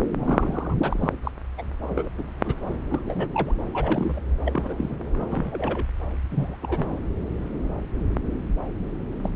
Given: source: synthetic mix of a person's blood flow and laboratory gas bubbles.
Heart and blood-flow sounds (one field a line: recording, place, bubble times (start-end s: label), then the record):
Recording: Doppler ultrasound of blood flow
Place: subclavian vein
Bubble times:
0.00-0.07 s: bubbles
0.14-0.74 s: bubbles
0.83-1.12 s: bubbles
1.23-1.31 s: bubbles
1.57-1.63 s: bubbles
1.81-2.10 s: bubbles
2.17-2.24 s: bubbles
2.44-2.54 s: bubbles
2.65-2.77 s: bubbles
2.90-3.28 s: bubbles
3.33-3.53 s: bubbles
3.65-4.21 s: bubbles
4.45-5.00 s: bubbles
5.17-5.27 s: bubbles
5.30-5.87 s: bubbles
6.31-6.56 s: bubbles
6.61-7.02 s: bubbles
9.22-9.32 s: bubbles
From the record:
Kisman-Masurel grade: 233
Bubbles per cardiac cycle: several, 3 to 8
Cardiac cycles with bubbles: 50 to 99%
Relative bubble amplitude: loud (0.450 to 0.775)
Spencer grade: 3 (all of the cardiac periods contain showers or single bubble signals, but not dominating or overriding the cardiac motion signals)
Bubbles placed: anywhere in the cardiac cycle